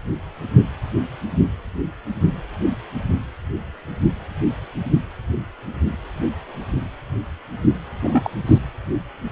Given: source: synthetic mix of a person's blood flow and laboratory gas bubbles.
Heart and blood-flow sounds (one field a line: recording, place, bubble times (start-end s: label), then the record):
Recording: Doppler ultrasound of blood flow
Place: precordium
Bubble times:
8.04-8.30 s: bubbles
8.46-8.58 s: bubbles
From the record:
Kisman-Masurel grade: 212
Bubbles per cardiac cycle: several, 3 to 8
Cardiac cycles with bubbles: 1 to 10%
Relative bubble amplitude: moderate (0.250 to 0.450)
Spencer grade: 1 (occasional bubble signal discernible with the cardiac motion signal, with majority of cardiac periods free of bubbles)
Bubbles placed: anywhere in the cardiac cycle